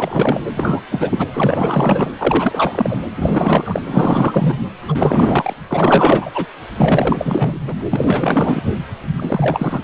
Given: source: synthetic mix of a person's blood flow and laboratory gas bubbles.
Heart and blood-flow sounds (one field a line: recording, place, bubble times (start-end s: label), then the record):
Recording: Doppler ultrasound of blood flow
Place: precordium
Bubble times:
0.00-0.42 s: bubbles
0.54-0.82 s: bubbles
0.91-1.27 s: bubbles
1.34-2.10 s: bubbles
2.18-2.97 s: bubbles
3.15-3.82 s: bubbles
3.86-4.54 s: bubbles
4.88-5.54 s: bubbles
5.67-6.31 s: bubbles
6.34-6.46 s: bubbles
6.76-7.74 s: bubbles
7.90-8.61 s: bubbles
9.17-9.82 s: bubbles
From the record:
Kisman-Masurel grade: 444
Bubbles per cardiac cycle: continuous sound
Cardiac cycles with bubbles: 100%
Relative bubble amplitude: maximal (0.775 to 0.999)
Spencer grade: 4 (maximum detectable bubble signal sounding continuously throughout systole and diastole of every cardiac period, and overriding the amplitude of the normal cardiac signals)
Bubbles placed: anywhere in the cardiac cycle